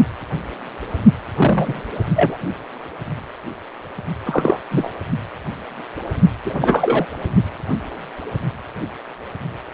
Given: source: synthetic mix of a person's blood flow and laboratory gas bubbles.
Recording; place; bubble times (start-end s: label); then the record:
Doppler ultrasound of blood flow; precordium
1.35-1.81 s: bubbles
2.15-2.37 s: bubbles
4.25-4.59 s: bubbles
4.71-4.91 s: bubbles
6.45-7.06 s: bubbles
From the record:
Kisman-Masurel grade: 233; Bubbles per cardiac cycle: several, 3 to 8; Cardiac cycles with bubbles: 50 to 99%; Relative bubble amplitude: loud (0.450 to 0.775); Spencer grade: 3 (all of the cardiac periods contain showers or single bubble signals, but not dominating or overriding the cardiac motion signals); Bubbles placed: only in the low amplitude regions of the cardiac cycle